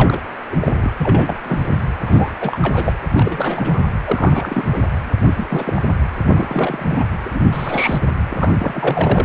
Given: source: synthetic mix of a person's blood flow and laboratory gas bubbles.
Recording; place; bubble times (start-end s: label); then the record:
Doppler ultrasound of blood flow; precordium
0.00-0.20 s: bubbles
0.51-0.56 s: bubbles
0.60-0.92 s: bubbles
0.96-1.36 s: bubbles
1.43-1.76 s: bubbles
1.98-2.35 s: bubbles
2.41-2.58 s: bubbles
2.62-2.93 s: bubbles
3.12-3.80 s: bubbles
4.04-4.68 s: bubbles
4.72-4.82 s: bubbles
5.27-5.33 s: bubbles
5.36-5.72 s: bubbles
5.75-5.81 s: bubbles
6.27-7.06 s: bubbles
7.25-7.30 s: bubbles
7.33-7.42 s: bubbles
7.52-7.98 s: bubbles
8.03-8.07 s: bubbles
8.29-8.54 s: bubbles
8.59-9.24 s: bubbles
From the record:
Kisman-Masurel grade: 342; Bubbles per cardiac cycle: rolling drumbeat, 9 or more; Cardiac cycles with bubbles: 100%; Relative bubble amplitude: moderate (0.250 to 0.450); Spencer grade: 3 (all of the cardiac periods contain showers or single bubble signals, but not dominating or overriding the cardiac motion signals); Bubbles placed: anywhere in the cardiac cycle